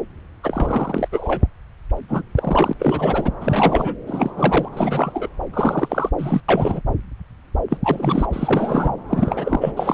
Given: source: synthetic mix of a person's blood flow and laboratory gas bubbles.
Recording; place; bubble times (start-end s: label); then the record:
Doppler ultrasound of blood flow; subclavian vein
0.43-1.08 s: bubbles
1.12-1.47 s: bubbles
2.08-2.23 s: bubbles
2.36-2.73 s: bubbles
2.79-3.31 s: bubbles
3.40-3.96 s: bubbles
4.07-4.31 s: bubbles
4.37-4.69 s: bubbles
4.72-5.29 s: bubbles
5.53-6.10 s: bubbles
6.18-6.41 s: bubbles
6.48-6.82 s: bubbles
7.70-7.77 s: bubbles
7.84-8.26 s: bubbles
8.33-8.95 s: bubbles
9.08-9.72 s: bubbles
9.77-9.94 s: bubbles
From the record:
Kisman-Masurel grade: 333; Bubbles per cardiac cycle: rolling drumbeat, 9 or more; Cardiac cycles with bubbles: 50 to 99%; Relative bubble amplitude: loud (0.450 to 0.775); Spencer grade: 3 (all of the cardiac periods contain showers or single bubble signals, but not dominating or overriding the cardiac motion signals); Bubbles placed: anywhere in the cardiac cycle